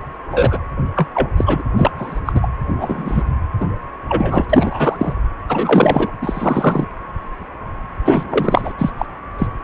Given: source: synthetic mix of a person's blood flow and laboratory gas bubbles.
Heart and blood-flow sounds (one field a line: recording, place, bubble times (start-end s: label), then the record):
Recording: Doppler ultrasound of blood flow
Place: precordium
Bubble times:
0.31-0.58 s: bubbles
0.96-1.07 s: bubbles
1.14-1.29 s: bubbles
1.36-1.62 s: bubbles
1.77-1.91 s: bubbles
1.98-2.19 s: bubbles
2.25-2.47 s: bubbles
2.78-3.23 s: bubbles
3.60-3.65 s: bubbles
4.08-4.46 s: bubbles
4.50-4.96 s: bubbles
4.99-5.14 s: bubbles
5.49-6.11 s: bubbles
6.22-6.86 s: bubbles
8.03-8.73 s: bubbles
8.79-8.91 s: bubbles
8.97-9.05 s: bubbles
9.38-9.47 s: bubbles
From the record:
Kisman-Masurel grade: 233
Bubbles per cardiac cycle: several, 3 to 8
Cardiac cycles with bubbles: 50 to 99%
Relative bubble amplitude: loud (0.450 to 0.775)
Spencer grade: 3 (all of the cardiac periods contain showers or single bubble signals, but not dominating or overriding the cardiac motion signals)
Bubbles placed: anywhere in the cardiac cycle